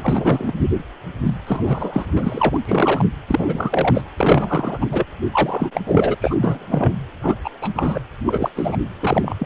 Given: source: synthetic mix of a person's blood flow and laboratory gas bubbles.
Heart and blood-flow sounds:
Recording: Doppler ultrasound of blood flow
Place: precordium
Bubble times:
0.00-0.54 s: bubbles
1.23-1.35 s: bubbles
1.46-2.07 s: bubbles
2.15-2.60 s: bubbles
2.65-3.05 s: bubbles
3.27-4.04 s: bubbles
4.17-4.86 s: bubbles
4.89-5.04 s: bubbles
5.32-5.71 s: bubbles
5.74-5.81 s: bubbles
5.86-6.15 s: bubbles
6.21-6.93 s: bubbles
7.22-7.35 s: bubbles
7.44-7.50 s: bubbles
7.61-7.71 s: bubbles
7.75-8.01 s: bubbles
8.26-8.50 s: bubbles
8.55-8.77 s: bubbles
9.01-9.36 s: bubbles
9.38-9.46 s: bubbles
From the record:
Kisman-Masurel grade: 343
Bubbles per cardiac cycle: rolling drumbeat, 9 or more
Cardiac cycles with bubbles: 100%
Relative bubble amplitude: loud (0.450 to 0.775)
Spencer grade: 3 (all of the cardiac periods contain showers or single bubble signals, but not dominating or overriding the cardiac motion signals)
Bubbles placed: anywhere in the cardiac cycle

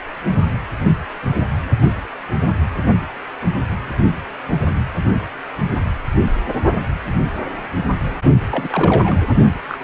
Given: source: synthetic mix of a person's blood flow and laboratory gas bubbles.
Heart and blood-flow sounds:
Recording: Doppler ultrasound of blood flow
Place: precordium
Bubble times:
8.51-8.67 s: bubbles
8.70-9.16 s: bubbles
9.68-9.77 s: bubbles
From the record:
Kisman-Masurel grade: 222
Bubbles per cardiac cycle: several, 3 to 8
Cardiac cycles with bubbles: 10 to 50%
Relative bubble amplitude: moderate (0.250 to 0.450)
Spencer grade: 2 (many but less than half of the cardiac periods contain bubble signals, singularly or in groups)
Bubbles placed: only in the low amplitude regions of the cardiac cycle

